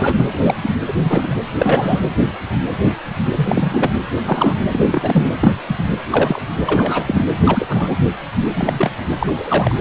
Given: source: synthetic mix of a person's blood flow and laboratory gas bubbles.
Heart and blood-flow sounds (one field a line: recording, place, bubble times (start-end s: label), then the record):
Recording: Doppler ultrasound of blood flow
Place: precordium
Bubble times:
0.00-0.25 s: bubbles
0.33-0.56 s: bubbles
0.62-0.70 s: bubbles
0.87-0.93 s: bubbles
1.04-1.35 s: bubbles
1.58-2.00 s: bubbles
3.36-3.90 s: bubbles
4.24-4.54 s: bubbles
4.72-5.32 s: bubbles
5.40-5.52 s: bubbles
5.68-5.83 s: bubbles
6.11-6.42 s: bubbles
6.66-7.27 s: bubbles
7.44-7.95 s: bubbles
8.55-8.73 s: bubbles
8.78-8.92 s: bubbles
9.19-9.75 s: bubbles
From the record:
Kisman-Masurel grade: 233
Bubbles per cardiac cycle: several, 3 to 8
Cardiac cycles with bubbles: 50 to 99%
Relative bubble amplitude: loud (0.450 to 0.775)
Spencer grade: 3 (all of the cardiac periods contain showers or single bubble signals, but not dominating or overriding the cardiac motion signals)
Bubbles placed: anywhere in the cardiac cycle